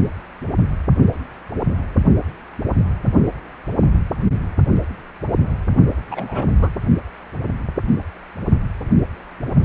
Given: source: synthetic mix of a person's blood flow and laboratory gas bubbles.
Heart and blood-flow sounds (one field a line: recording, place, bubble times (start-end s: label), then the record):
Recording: Doppler ultrasound of blood flow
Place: precordium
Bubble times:
6.11-6.45 s: bubbles
6.61-6.69 s: bubbles
From the record:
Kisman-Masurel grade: 212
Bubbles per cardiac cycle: several, 3 to 8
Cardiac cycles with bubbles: 1 to 10%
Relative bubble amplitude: moderate (0.250 to 0.450)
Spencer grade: 1 (occasional bubble signal discernible with the cardiac motion signal, with majority of cardiac periods free of bubbles)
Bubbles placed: only in the low amplitude regions of the cardiac cycle